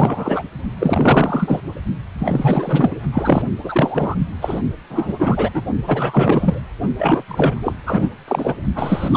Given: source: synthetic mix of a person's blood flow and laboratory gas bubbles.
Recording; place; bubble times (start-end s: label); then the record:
Doppler ultrasound of blood flow; precordium
0.00-0.44 s: bubbles
0.79-1.60 s: bubbles
2.19-2.96 s: bubbles
3.12-3.42 s: bubbles
3.63-4.16 s: bubbles
4.42-4.62 s: bubbles
4.90-5.51 s: bubbles
5.54-5.62 s: bubbles
5.87-6.62 s: bubbles
6.98-7.23 s: bubbles
7.28-7.75 s: bubbles
7.86-8.09 s: bubbles
8.28-8.54 s: bubbles
8.75-9.17 s: bubbles
From the record:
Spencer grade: 4 (maximum detectable bubble signal sounding continuously throughout systole and diastole of every cardiac period, and overriding the amplitude of the normal cardiac signals); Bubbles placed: only in the low amplitude regions of the cardiac cycle